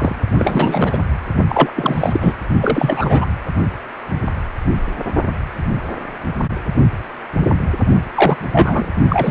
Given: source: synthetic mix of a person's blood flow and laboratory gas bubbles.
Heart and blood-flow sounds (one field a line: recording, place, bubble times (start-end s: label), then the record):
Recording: Doppler ultrasound of blood flow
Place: precordium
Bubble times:
0.00-0.15 s: bubbles
0.36-0.98 s: bubbles
1.47-1.72 s: bubbles
1.76-2.35 s: bubbles
2.60-3.26 s: bubbles
8.14-8.36 s: bubbles
8.53-8.89 s: bubbles
9.08-9.31 s: bubbles
From the record:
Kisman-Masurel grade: 333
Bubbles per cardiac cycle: rolling drumbeat, 9 or more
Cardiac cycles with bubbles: 50 to 99%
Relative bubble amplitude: loud (0.450 to 0.775)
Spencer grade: 3 (all of the cardiac periods contain showers or single bubble signals, but not dominating or overriding the cardiac motion signals)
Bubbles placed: only in the low amplitude regions of the cardiac cycle